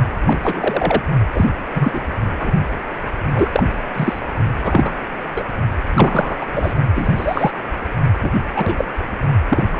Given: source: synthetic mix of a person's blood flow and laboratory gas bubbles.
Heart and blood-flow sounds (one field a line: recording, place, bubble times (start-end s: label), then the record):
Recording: Doppler ultrasound of blood flow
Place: precordium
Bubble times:
0.26-1.02 s: bubbles
1.33-1.46 s: bubbles
1.75-2.01 s: bubbles
2.39-2.52 s: bubbles
3.35-3.66 s: bubbles
3.94-4.21 s: bubbles
4.63-4.95 s: bubbles
5.34-5.44 s: bubbles
5.93-6.37 s: bubbles
6.41-6.46 s: bubbles
6.53-6.75 s: bubbles
6.95-7.51 s: bubbles
8.22-8.30 s: bubbles
8.54-8.75 s: bubbles
8.78-8.87 s: bubbles
9.48-9.63 s: bubbles
9.72-9.79 s: bubbles
From the record:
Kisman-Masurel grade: 243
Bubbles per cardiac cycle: several, 3 to 8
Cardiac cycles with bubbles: 100%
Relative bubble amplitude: loud (0.450 to 0.775)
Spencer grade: 3 (all of the cardiac periods contain showers or single bubble signals, but not dominating or overriding the cardiac motion signals)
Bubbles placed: only in the low amplitude regions of the cardiac cycle